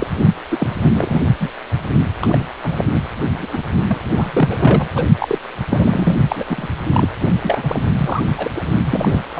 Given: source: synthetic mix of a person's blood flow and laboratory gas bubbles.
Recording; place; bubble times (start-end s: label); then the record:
Doppler ultrasound of blood flow; precordium
0.00-0.07 s: bubbles
0.49-0.75 s: bubbles
0.82-0.90 s: bubbles
0.93-1.25 s: bubbles
1.40-1.50 s: bubbles
2.21-2.47 s: bubbles
2.62-2.85 s: bubbles
2.94-3.01 s: bubbles
3.39-3.48 s: bubbles
3.52-3.62 s: bubbles
3.88-3.98 s: bubbles
4.15-4.88 s: bubbles
4.94-5.05 s: bubbles
5.19-5.38 s: bubbles
5.69-6.16 s: bubbles
6.29-6.45 s: bubbles
6.49-6.68 s: bubbles
6.92-7.08 s: bubbles
7.41-7.80 s: bubbles
7.97-8.21 s: bubbles
8.36-8.51 s: bubbles
8.55-8.67 s: bubbles
8.85-9.23 s: bubbles
9.35-9.40 s: bubbles
From the record:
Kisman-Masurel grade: 342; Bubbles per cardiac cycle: rolling drumbeat, 9 or more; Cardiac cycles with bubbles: 100%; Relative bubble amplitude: moderate (0.250 to 0.450); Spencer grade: 3 (all of the cardiac periods contain showers or single bubble signals, but not dominating or overriding the cardiac motion signals); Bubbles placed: only in the low amplitude regions of the cardiac cycle